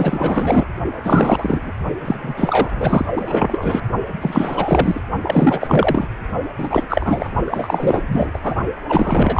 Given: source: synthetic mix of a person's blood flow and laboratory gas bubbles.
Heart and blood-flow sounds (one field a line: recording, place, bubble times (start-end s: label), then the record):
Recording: Doppler ultrasound of blood flow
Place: precordium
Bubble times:
0.00-0.66 s: bubbles
1.03-1.72 s: bubbles
2.04-3.05 s: bubbles
3.16-3.81 s: bubbles
4.21-5.01 s: bubbles
5.22-6.08 s: bubbles
6.58-6.84 s: bubbles
6.89-7.31 s: bubbles
7.46-8.03 s: bubbles
8.08-8.31 s: bubbles
8.33-8.55 s: bubbles
8.88-9.40 s: bubbles
From the record:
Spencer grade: 4 (maximum detectable bubble signal sounding continuously throughout systole and diastole of every cardiac period, and overriding the amplitude of the normal cardiac signals)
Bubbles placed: only in the low amplitude regions of the cardiac cycle